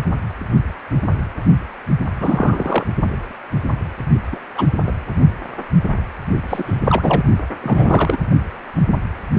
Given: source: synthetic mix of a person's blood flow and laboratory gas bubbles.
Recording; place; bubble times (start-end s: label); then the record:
Doppler ultrasound of blood flow; precordium
2.20-2.84 s: bubbles
4.31-4.39 s: bubbles
4.55-4.67 s: bubbles
4.86-4.93 s: bubbles
6.49-7.23 s: bubbles
7.62-8.17 s: bubbles
From the record:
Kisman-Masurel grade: 233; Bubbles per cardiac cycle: several, 3 to 8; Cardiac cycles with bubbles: 50 to 99%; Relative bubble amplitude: loud (0.450 to 0.775); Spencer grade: 3 (all of the cardiac periods contain showers or single bubble signals, but not dominating or overriding the cardiac motion signals); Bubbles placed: only in the low amplitude regions of the cardiac cycle